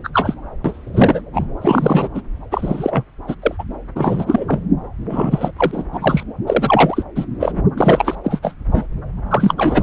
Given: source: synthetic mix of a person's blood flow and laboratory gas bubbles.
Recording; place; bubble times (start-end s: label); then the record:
Doppler ultrasound of blood flow; subclavian vein
0.04-0.10 s: bubbles
0.13-0.35 s: bubbles
0.64-1.21 s: bubbles
1.33-1.47 s: bubbles
1.62-2.09 s: bubbles
2.15-2.21 s: bubbles
2.51-3.04 s: bubbles
3.27-3.35 s: bubbles
3.42-3.55 s: bubbles
3.58-3.63 s: bubbles
3.95-4.62 s: bubbles
5.09-5.51 s: bubbles
5.58-5.84 s: bubbles
5.92-6.23 s: bubbles
6.46-7.04 s: bubbles
7.16-7.25 s: bubbles
7.40-7.52 s: bubbles
7.77-8.15 s: bubbles
8.23-8.40 s: bubbles
8.42-8.54 s: bubbles
8.71-8.86 s: bubbles
9.29-9.54 s: bubbles
9.58-9.83 s: bubbles
From the record:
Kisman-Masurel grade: 343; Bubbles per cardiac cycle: rolling drumbeat, 9 or more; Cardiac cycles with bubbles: 100%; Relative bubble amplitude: loud (0.450 to 0.775); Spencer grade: 3 (all of the cardiac periods contain showers or single bubble signals, but not dominating or overriding the cardiac motion signals); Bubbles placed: anywhere in the cardiac cycle